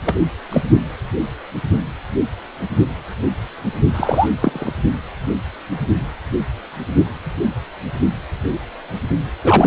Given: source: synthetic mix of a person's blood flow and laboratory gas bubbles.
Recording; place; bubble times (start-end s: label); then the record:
Doppler ultrasound of blood flow; precordium
0.05-0.17 s: bubbles
0.49-0.62 s: bubbles
3.94-4.29 s: bubbles
4.39-4.73 s: bubbles
9.43-9.67 s: bubbles
From the record:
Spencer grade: 2 (many but less than half of the cardiac periods contain bubble signals, singularly or in groups); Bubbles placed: only in the low amplitude regions of the cardiac cycle